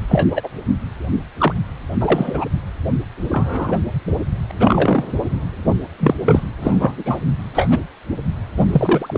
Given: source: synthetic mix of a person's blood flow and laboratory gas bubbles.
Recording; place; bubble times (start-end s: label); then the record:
Doppler ultrasound of blood flow; precordium
0.08-0.49 s: bubbles
1.38-1.53 s: bubbles
2.01-2.45 s: bubbles
3.31-3.77 s: bubbles
4.50-4.52 s: bubbles
4.58-5.04 s: bubbles
6.00-6.15 s: bubbles
6.25-6.40 s: bubbles
6.61-7.19 s: bubbles
7.54-7.84 s: bubbles
8.56-9.18 s: bubbles
From the record:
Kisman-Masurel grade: 233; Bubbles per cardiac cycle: several, 3 to 8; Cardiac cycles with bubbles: 50 to 99%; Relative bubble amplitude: loud (0.450 to 0.775); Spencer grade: 3 (all of the cardiac periods contain showers or single bubble signals, but not dominating or overriding the cardiac motion signals); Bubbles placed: anywhere in the cardiac cycle